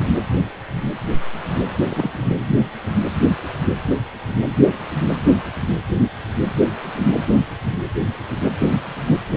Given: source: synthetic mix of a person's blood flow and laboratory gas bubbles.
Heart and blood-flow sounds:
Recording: Doppler ultrasound of blood flow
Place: precordium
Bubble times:
1.89-2.36 s: bubbles
From the record:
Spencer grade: 1 (occasional bubble signal discernible with the cardiac motion signal, with majority of cardiac periods free of bubbles)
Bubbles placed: anywhere in the cardiac cycle

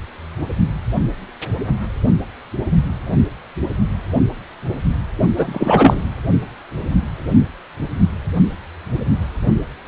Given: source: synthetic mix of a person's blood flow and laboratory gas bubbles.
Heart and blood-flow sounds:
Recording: Doppler ultrasound of blood flow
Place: precordium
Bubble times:
5.35-6.03 s: bubbles
From the record:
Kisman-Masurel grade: 213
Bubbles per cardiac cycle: several, 3 to 8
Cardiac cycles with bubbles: 1 to 10%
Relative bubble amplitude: loud (0.450 to 0.775)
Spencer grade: 1 (occasional bubble signal discernible with the cardiac motion signal, with majority of cardiac periods free of bubbles)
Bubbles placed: only in the low amplitude regions of the cardiac cycle

